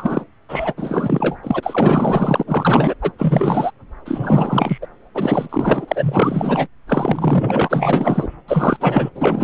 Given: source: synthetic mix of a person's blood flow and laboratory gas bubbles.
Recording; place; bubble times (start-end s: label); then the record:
Doppler ultrasound of blood flow; subclavian vein
0.00-0.25 s: bubbles
0.49-0.73 s: bubbles
0.76-1.37 s: bubbles
1.43-2.44 s: bubbles
2.46-2.94 s: bubbles
3.01-3.11 s: bubbles
3.18-3.71 s: bubbles
4.05-4.78 s: bubbles
4.82-4.87 s: bubbles
5.15-5.85 s: bubbles
5.88-6.68 s: bubbles
6.87-8.28 s: bubbles
8.47-8.77 s: bubbles
8.79-9.10 s: bubbles
9.15-9.44 s: bubbles
From the record:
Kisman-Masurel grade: 444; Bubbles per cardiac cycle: continuous sound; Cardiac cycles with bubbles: 100%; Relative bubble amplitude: maximal (0.775 to 0.999); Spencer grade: 4 (maximum detectable bubble signal sounding continuously throughout systole and diastole of every cardiac period, and overriding the amplitude of the normal cardiac signals); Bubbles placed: anywhere in the cardiac cycle